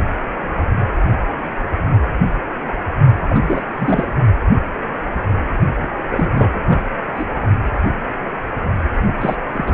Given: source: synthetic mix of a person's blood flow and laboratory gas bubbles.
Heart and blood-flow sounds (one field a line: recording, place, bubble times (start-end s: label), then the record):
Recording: Doppler ultrasound of blood flow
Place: precordium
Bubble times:
3.22-3.40 s: bubbles
3.42-4.14 s: bubbles
5.81-5.88 s: bubbles
6.11-6.83 s: bubbles
7.15-7.26 s: bubbles
9.06-9.13 s: bubbles
9.21-9.36 s: bubbles
9.52-9.74 s: bubbles
From the record:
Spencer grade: 3 (all of the cardiac periods contain showers or single bubble signals, but not dominating or overriding the cardiac motion signals)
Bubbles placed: only in the low amplitude regions of the cardiac cycle